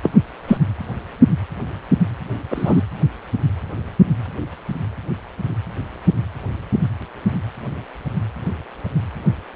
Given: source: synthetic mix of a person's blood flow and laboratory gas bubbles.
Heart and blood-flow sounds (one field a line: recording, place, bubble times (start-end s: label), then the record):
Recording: Doppler ultrasound of blood flow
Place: precordium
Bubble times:
0.03-0.10 s: bubbles
0.48-0.57 s: bubbles
2.50-2.83 s: bubbles
From the record:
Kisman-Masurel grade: 113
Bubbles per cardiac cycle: 1 to 2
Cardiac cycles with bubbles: 1 to 10%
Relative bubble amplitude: loud (0.450 to 0.775)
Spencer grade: 1 (occasional bubble signal discernible with the cardiac motion signal, with majority of cardiac periods free of bubbles)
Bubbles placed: anywhere in the cardiac cycle